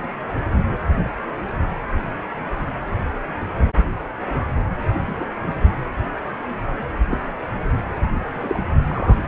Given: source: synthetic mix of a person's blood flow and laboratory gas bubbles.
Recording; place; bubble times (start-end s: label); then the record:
Doppler ultrasound of blood flow; precordium
5.04-5.25 s: bubbles
7.08-7.18 s: bubbles
8.35-8.63 s: bubbles
8.88-9.18 s: bubbles
From the record:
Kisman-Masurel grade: 122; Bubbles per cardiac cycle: 1 to 2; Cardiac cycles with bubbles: 10 to 50%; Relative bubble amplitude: moderate (0.250 to 0.450); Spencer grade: 2 (many but less than half of the cardiac periods contain bubble signals, singularly or in groups); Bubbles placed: anywhere in the cardiac cycle